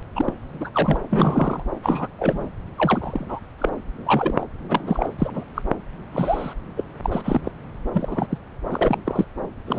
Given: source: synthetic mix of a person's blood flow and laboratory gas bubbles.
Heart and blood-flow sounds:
Doppler ultrasound of blood flow; subclavian vein
0.15-0.34 s: bubbles
0.60-0.70 s: bubbles
0.74-0.98 s: bubbles
1.09-1.62 s: bubbles
1.82-2.08 s: bubbles
2.19-2.49 s: bubbles
2.78-3.40 s: bubbles
3.58-3.69 s: bubbles
4.05-4.46 s: bubbles
4.69-5.08 s: bubbles
5.18-5.44 s: bubbles
5.54-5.62 s: bubbles
6.12-6.54 s: bubbles
6.76-6.84 s: bubbles
7.04-7.41 s: bubbles
7.43-7.51 s: bubbles
7.94-8.27 s: bubbles
8.30-8.38 s: bubbles
8.71-8.98 s: bubbles
9.06-9.24 s: bubbles
9.66-9.79 s: bubbles
From the record:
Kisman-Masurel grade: 242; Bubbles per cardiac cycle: several, 3 to 8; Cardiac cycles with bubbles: 100%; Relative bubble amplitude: moderate (0.250 to 0.450); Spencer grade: 3 (all of the cardiac periods contain showers or single bubble signals, but not dominating or overriding the cardiac motion signals); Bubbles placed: anywhere in the cardiac cycle

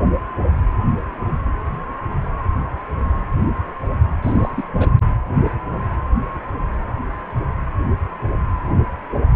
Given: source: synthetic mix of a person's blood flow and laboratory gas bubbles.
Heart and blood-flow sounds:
Doppler ultrasound of blood flow; precordium
4.22-4.68 s: bubbles
4.73-4.90 s: bubbles
From the record:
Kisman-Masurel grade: 211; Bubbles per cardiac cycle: several, 3 to 8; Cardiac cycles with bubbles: 1 to 10%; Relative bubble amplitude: barely perceptible (0.100 to 0.250); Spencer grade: 1 (occasional bubble signal discernible with the cardiac motion signal, with majority of cardiac periods free of bubbles); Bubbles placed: anywhere in the cardiac cycle

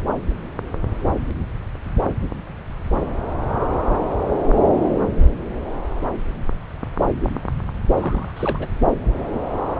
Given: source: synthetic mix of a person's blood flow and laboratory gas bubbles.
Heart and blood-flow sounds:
Doppler ultrasound of blood flow; subclavian vein
7.94-8.32 s: bubbles
8.37-8.68 s: bubbles
From the record:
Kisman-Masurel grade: 211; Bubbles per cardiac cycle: several, 3 to 8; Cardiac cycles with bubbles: 1 to 10%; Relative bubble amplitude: barely perceptible (0.100 to 0.250); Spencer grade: 1 (occasional bubble signal discernible with the cardiac motion signal, with majority of cardiac periods free of bubbles); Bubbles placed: anywhere in the cardiac cycle

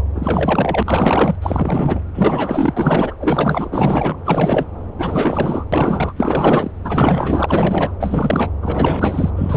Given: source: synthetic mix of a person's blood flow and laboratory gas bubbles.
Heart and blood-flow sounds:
Doppler ultrasound of blood flow; subclavian vein
0.15-1.35 s: bubbles
1.42-2.00 s: bubbles
2.13-2.74 s: bubbles
2.76-3.15 s: bubbles
3.19-4.17 s: bubbles
4.25-4.67 s: bubbles
4.98-5.64 s: bubbles
5.72-6.13 s: bubbles
6.16-6.71 s: bubbles
6.84-7.92 s: bubbles
8.00-8.50 s: bubbles
8.62-9.31 s: bubbles
9.36-9.57 s: bubbles
From the record:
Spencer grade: 4 (maximum detectable bubble signal sounding continuously throughout systole and diastole of every cardiac period, and overriding the amplitude of the normal cardiac signals); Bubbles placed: anywhere in the cardiac cycle

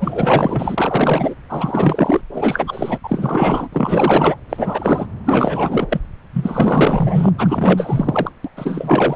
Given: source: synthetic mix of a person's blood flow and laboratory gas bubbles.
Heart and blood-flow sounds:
Doppler ultrasound of blood flow; subclavian vein
0.01-1.34 s: bubbles
1.49-2.21 s: bubbles
2.33-2.99 s: bubbles
3.03-3.68 s: bubbles
3.72-4.36 s: bubbles
4.49-5.07 s: bubbles
5.26-5.87 s: bubbles
5.90-6.00 s: bubbles
6.33-7.31 s: bubbles
7.38-8.29 s: bubbles
8.44-8.50 s: bubbles
8.56-9.16 s: bubbles
From the record:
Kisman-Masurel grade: 444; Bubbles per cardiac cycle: continuous sound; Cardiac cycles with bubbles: 100%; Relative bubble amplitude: maximal (0.775 to 0.999); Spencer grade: 4 (maximum detectable bubble signal sounding continuously throughout systole and diastole of every cardiac period, and overriding the amplitude of the normal cardiac signals); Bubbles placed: anywhere in the cardiac cycle

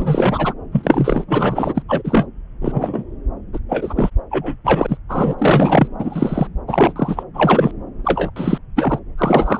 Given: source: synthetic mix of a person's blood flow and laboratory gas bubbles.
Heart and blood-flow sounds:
Doppler ultrasound of blood flow; subclavian vein
0.00-0.54 s: bubbles
0.71-1.83 s: bubbles
1.89-2.26 s: bubbles
2.62-3.04 s: bubbles
3.53-3.59 s: bubbles
3.69-4.10 s: bubbles
4.30-4.57 s: bubbles
4.64-4.98 s: bubbles
5.08-5.36 s: bubbles
5.38-5.88 s: bubbles
5.98-6.47 s: bubbles
6.67-6.93 s: bubbles
6.96-7.23 s: bubbles
7.34-7.71 s: bubbles
8.04-8.30 s: bubbles
8.36-8.58 s: bubbles
8.76-8.99 s: bubbles
9.17-9.60 s: bubbles
From the record:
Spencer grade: 3 (all of the cardiac periods contain showers or single bubble signals, but not dominating or overriding the cardiac motion signals); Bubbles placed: anywhere in the cardiac cycle

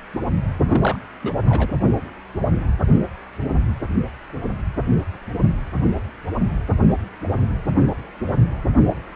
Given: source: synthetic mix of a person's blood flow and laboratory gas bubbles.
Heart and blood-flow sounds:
Doppler ultrasound of blood flow; precordium
0.66-0.99 s: bubbles
1.22-1.33 s: bubbles
1.45-1.73 s: bubbles
From the record:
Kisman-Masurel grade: 212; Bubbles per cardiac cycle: several, 3 to 8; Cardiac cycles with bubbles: 1 to 10%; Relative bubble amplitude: moderate (0.250 to 0.450); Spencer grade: 1 (occasional bubble signal discernible with the cardiac motion signal, with majority of cardiac periods free of bubbles); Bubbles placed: anywhere in the cardiac cycle

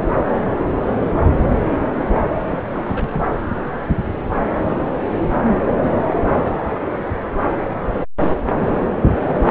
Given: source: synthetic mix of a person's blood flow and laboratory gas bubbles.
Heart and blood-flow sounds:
Doppler ultrasound of blood flow; subclavian vein
2.44-2.59 s: bubbles
2.71-3.26 s: bubbles
From the record:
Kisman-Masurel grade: 211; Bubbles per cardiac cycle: several, 3 to 8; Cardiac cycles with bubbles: 1 to 10%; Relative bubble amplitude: barely perceptible (0.100 to 0.250); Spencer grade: 1 (occasional bubble signal discernible with the cardiac motion signal, with majority of cardiac periods free of bubbles); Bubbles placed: anywhere in the cardiac cycle

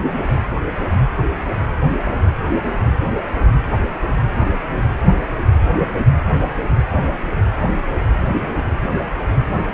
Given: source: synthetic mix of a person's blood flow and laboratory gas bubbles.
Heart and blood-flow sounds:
Doppler ultrasound of blood flow; precordium
no bubbles
From the record:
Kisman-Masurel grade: 000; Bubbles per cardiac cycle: 0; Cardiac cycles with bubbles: 0%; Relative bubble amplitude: no bubbles discernible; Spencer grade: 0 (complete lack of bubble signals)

